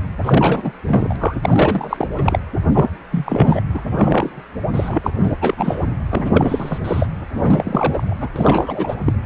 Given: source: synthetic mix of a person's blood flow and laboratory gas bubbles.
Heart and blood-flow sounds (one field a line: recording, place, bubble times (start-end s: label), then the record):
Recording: Doppler ultrasound of blood flow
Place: precordium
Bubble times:
0.23-0.71 s: bubbles
0.88-1.16 s: bubbles
1.19-1.38 s: bubbles
1.43-2.08 s: bubbles
2.17-2.39 s: bubbles
2.74-2.89 s: bubbles
3.12-3.62 s: bubbles
3.74-3.81 s: bubbles
3.91-4.44 s: bubbles
4.74-4.99 s: bubbles
5.03-5.11 s: bubbles
5.19-5.35 s: bubbles
5.41-5.54 s: bubbles
5.57-5.88 s: bubbles
6.08-6.78 s: bubbles
6.84-7.07 s: bubbles
7.35-8.14 s: bubbles
8.20-8.29 s: bubbles
8.36-8.96 s: bubbles
9.05-9.13 s: bubbles
From the record:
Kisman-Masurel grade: 333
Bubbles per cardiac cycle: rolling drumbeat, 9 or more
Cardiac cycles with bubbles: 50 to 99%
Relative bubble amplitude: loud (0.450 to 0.775)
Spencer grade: 3 (all of the cardiac periods contain showers or single bubble signals, but not dominating or overriding the cardiac motion signals)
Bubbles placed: anywhere in the cardiac cycle